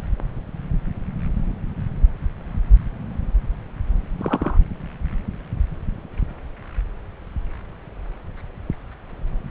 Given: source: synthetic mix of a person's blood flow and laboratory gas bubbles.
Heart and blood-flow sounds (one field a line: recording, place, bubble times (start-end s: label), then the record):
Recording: Doppler ultrasound of blood flow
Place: subclavian vein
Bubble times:
4.19-4.58 s: bubbles
From the record:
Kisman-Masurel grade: 112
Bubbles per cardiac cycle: 1 to 2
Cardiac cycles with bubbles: 1 to 10%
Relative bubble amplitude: moderate (0.250 to 0.450)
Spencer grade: 1 (occasional bubble signal discernible with the cardiac motion signal, with majority of cardiac periods free of bubbles)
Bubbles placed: anywhere in the cardiac cycle